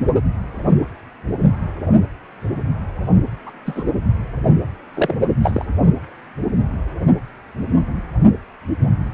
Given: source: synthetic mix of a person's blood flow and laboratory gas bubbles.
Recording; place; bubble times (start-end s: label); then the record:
Doppler ultrasound of blood flow; precordium
3.46-3.51 s: bubbles
3.65-3.84 s: bubbles
4.94-5.14 s: bubbles
5.43-5.65 s: bubbles
From the record:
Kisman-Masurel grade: 122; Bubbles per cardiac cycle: 1 to 2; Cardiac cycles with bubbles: 10 to 50%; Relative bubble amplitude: moderate (0.250 to 0.450); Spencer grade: 2 (many but less than half of the cardiac periods contain bubble signals, singularly or in groups); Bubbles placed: anywhere in the cardiac cycle